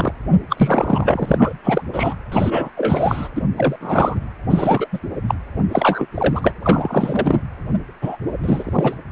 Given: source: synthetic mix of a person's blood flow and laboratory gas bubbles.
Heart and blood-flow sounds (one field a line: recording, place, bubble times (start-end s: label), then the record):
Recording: Doppler ultrasound of blood flow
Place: precordium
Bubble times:
0.00-0.12 s: bubbles
0.49-1.54 s: bubbles
1.63-1.82 s: bubbles
1.92-2.16 s: bubbles
2.31-2.70 s: bubbles
2.76-3.28 s: bubbles
3.35-3.42 s: bubbles
3.56-3.76 s: bubbles
3.80-4.20 s: bubbles
4.50-4.87 s: bubbles
4.92-5.00 s: bubbles
5.27-5.34 s: bubbles
5.71-6.07 s: bubbles
6.14-6.54 s: bubbles
6.62-7.41 s: bubbles
8.02-8.17 s: bubbles
8.43-8.96 s: bubbles
From the record:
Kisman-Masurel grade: 343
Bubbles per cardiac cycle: rolling drumbeat, 9 or more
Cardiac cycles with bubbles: 100%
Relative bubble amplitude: loud (0.450 to 0.775)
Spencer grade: 3 (all of the cardiac periods contain showers or single bubble signals, but not dominating or overriding the cardiac motion signals)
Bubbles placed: anywhere in the cardiac cycle